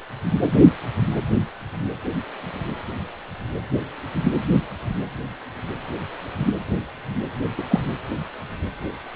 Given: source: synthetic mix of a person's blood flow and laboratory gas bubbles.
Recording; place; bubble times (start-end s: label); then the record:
Doppler ultrasound of blood flow; precordium
7.58-7.62 s: bubbles
7.70-7.79 s: bubbles
From the record:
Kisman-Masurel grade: 112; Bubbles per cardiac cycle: 1 to 2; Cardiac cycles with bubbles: 1 to 10%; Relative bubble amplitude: moderate (0.250 to 0.450); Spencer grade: 1 (occasional bubble signal discernible with the cardiac motion signal, with majority of cardiac periods free of bubbles); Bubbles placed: anywhere in the cardiac cycle